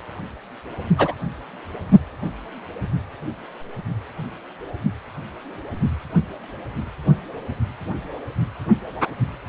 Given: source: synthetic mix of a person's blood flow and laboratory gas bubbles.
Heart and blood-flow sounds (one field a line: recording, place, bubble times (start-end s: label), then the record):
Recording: Doppler ultrasound of blood flow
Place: precordium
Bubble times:
0.98-1.15 s: bubbles
From the record:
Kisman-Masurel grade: 123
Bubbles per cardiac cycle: 1 to 2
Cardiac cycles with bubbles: 10 to 50%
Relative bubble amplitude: loud (0.450 to 0.775)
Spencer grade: 2 (many but less than half of the cardiac periods contain bubble signals, singularly or in groups)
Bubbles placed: only in the low amplitude regions of the cardiac cycle